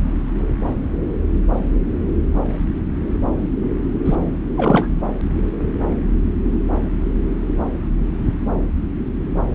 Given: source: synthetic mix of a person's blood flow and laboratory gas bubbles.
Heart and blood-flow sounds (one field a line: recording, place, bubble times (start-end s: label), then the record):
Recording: Doppler ultrasound of blood flow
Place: subclavian vein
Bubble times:
4.05-4.15 s: bubbles
4.56-4.88 s: bubbles
From the record:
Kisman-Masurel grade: 223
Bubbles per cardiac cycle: several, 3 to 8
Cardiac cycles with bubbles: 10 to 50%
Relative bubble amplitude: loud (0.450 to 0.775)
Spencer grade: 2 (many but less than half of the cardiac periods contain bubble signals, singularly or in groups)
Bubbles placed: anywhere in the cardiac cycle